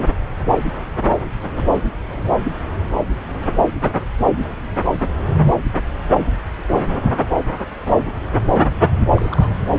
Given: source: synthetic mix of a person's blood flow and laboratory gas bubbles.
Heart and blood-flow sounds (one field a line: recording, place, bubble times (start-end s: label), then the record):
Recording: Doppler ultrasound of blood flow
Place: subclavian vein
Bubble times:
9.13-9.50 s: bubbles
From the record:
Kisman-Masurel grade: 211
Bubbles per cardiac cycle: several, 3 to 8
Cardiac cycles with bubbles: 1 to 10%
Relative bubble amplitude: barely perceptible (0.100 to 0.250)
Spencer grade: 1 (occasional bubble signal discernible with the cardiac motion signal, with majority of cardiac periods free of bubbles)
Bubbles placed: anywhere in the cardiac cycle